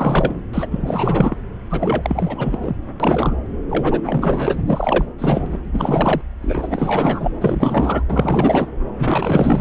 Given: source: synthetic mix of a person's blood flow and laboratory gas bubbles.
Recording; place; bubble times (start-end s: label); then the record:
Doppler ultrasound of blood flow; subclavian vein
0.00-0.39 s: bubbles
0.53-0.67 s: bubbles
0.71-1.36 s: bubbles
1.70-2.76 s: bubbles
3.00-3.35 s: bubbles
3.69-4.01 s: bubbles
4.04-4.62 s: bubbles
4.66-5.05 s: bubbles
5.18-5.46 s: bubbles
5.51-5.59 s: bubbles
5.65-6.21 s: bubbles
6.41-7.31 s: bubbles
7.41-8.04 s: bubbles
8.09-8.67 s: bubbles
8.97-9.61 s: bubbles
From the record:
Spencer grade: 4 (maximum detectable bubble signal sounding continuously throughout systole and diastole of every cardiac period, and overriding the amplitude of the normal cardiac signals); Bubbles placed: anywhere in the cardiac cycle